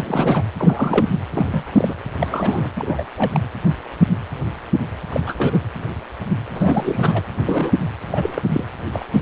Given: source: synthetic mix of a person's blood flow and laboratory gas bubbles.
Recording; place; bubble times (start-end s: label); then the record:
Doppler ultrasound of blood flow; precordium
0.00-0.42 s: bubbles
0.57-1.06 s: bubbles
1.31-1.68 s: bubbles
1.72-1.94 s: bubbles
2.19-2.69 s: bubbles
2.76-3.04 s: bubbles
3.17-3.31 s: bubbles
3.34-3.40 s: bubbles
5.09-5.20 s: bubbles
5.26-5.35 s: bubbles
5.38-5.58 s: bubbles
6.54-7.23 s: bubbles
7.36-7.72 s: bubbles
8.10-8.44 s: bubbles
8.46-8.64 s: bubbles
8.93-9.06 s: bubbles
9.12-9.22 s: bubbles
From the record:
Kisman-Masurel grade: 232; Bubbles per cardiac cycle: several, 3 to 8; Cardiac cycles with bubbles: 50 to 99%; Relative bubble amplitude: moderate (0.250 to 0.450); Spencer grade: 3 (all of the cardiac periods contain showers or single bubble signals, but not dominating or overriding the cardiac motion signals); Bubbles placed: anywhere in the cardiac cycle